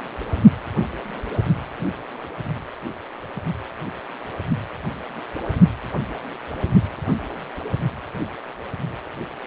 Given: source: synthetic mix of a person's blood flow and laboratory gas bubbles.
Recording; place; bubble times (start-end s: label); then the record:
Doppler ultrasound of blood flow; precordium
no bubbles
From the record:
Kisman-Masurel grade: 000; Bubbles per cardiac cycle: 0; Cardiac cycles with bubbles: 0%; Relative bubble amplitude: no bubbles discernible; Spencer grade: 0 (complete lack of bubble signals)